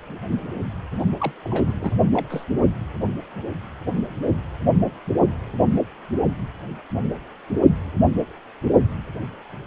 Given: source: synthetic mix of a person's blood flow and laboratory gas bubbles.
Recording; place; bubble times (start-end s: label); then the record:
Doppler ultrasound of blood flow; precordium
1.20-1.32 s: bubbles
1.45-1.73 s: bubbles
1.79-1.91 s: bubbles
2.13-2.26 s: bubbles
2.29-2.45 s: bubbles
From the record:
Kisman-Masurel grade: 211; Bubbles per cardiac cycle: several, 3 to 8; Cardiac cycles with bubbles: 1 to 10%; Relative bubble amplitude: barely perceptible (0.100 to 0.250); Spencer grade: 1 (occasional bubble signal discernible with the cardiac motion signal, with majority of cardiac periods free of bubbles); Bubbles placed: only in the low amplitude regions of the cardiac cycle